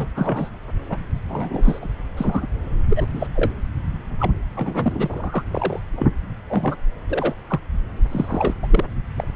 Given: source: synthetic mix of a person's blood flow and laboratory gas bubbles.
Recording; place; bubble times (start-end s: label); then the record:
Doppler ultrasound of blood flow; subclavian vein
0.00-0.07 s: bubbles
0.15-0.50 s: bubbles
0.89-0.97 s: bubbles
1.29-1.92 s: bubbles
2.17-2.46 s: bubbles
2.89-3.06 s: bubbles
3.12-3.27 s: bubbles
3.35-3.52 s: bubbles
4.18-4.32 s: bubbles
4.55-5.44 s: bubbles
5.53-5.82 s: bubbles
5.95-6.10 s: bubbles
6.47-6.76 s: bubbles
7.08-7.34 s: bubbles
7.47-7.59 s: bubbles
8.11-8.54 s: bubbles
8.62-8.68 s: bubbles
8.70-8.85 s: bubbles
9.16-9.28 s: bubbles
From the record:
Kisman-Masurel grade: 242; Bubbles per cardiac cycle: several, 3 to 8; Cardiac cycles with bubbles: 100%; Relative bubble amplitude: moderate (0.250 to 0.450); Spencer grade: 3 (all of the cardiac periods contain showers or single bubble signals, but not dominating or overriding the cardiac motion signals); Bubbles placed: anywhere in the cardiac cycle